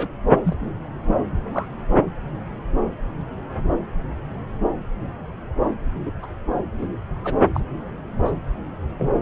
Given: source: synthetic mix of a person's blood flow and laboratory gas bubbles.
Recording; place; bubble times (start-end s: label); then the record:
Doppler ultrasound of blood flow; subclavian vein
0.00-0.08 s: bubbles
0.45-0.55 s: bubbles
1.06-1.16 s: bubbles
1.52-1.66 s: bubbles
6.05-6.12 s: bubbles
6.22-6.26 s: bubbles
6.78-6.88 s: bubbles
7.23-7.35 s: bubbles
7.54-7.60 s: bubbles
8.25-8.31 s: bubbles
8.98-9.10 s: bubbles
From the record:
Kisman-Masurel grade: 122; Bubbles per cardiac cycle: 1 to 2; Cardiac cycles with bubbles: 10 to 50%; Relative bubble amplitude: moderate (0.250 to 0.450); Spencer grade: 2 (many but less than half of the cardiac periods contain bubble signals, singularly or in groups); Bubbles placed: anywhere in the cardiac cycle